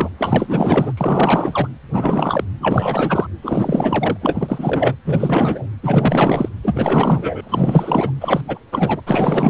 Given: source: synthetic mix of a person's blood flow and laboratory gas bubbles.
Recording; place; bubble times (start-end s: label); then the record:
Doppler ultrasound of blood flow; precordium
0.00-0.08 s: bubbles
0.18-0.93 s: bubbles
0.97-1.68 s: bubbles
1.91-2.44 s: bubbles
2.60-3.27 s: bubbles
3.42-4.17 s: bubbles
4.21-4.95 s: bubbles
5.05-5.66 s: bubbles
5.83-6.49 s: bubbles
6.62-8.13 s: bubbles
8.21-8.41 s: bubbles
8.47-8.58 s: bubbles
8.72-9.01 s: bubbles
9.06-9.50 s: bubbles
From the record:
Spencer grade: 4 (maximum detectable bubble signal sounding continuously throughout systole and diastole of every cardiac period, and overriding the amplitude of the normal cardiac signals); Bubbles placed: anywhere in the cardiac cycle